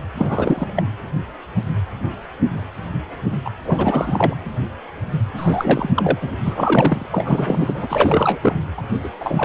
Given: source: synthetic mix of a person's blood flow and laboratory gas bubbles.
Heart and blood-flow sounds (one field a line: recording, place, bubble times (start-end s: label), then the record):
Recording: Doppler ultrasound of blood flow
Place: precordium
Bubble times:
0.17-0.67 s: bubbles
0.75-0.83 s: bubbles
3.44-3.49 s: bubbles
3.65-4.37 s: bubbles
5.36-5.89 s: bubbles
5.96-6.35 s: bubbles
6.44-7.06 s: bubbles
7.10-8.39 s: bubbles
8.42-8.56 s: bubbles
8.78-8.82 s: bubbles
9.03-9.09 s: bubbles
9.20-9.45 s: bubbles
From the record:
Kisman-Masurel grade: 332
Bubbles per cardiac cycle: rolling drumbeat, 9 or more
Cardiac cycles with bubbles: 50 to 99%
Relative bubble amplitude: moderate (0.250 to 0.450)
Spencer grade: 3 (all of the cardiac periods contain showers or single bubble signals, but not dominating or overriding the cardiac motion signals)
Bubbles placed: anywhere in the cardiac cycle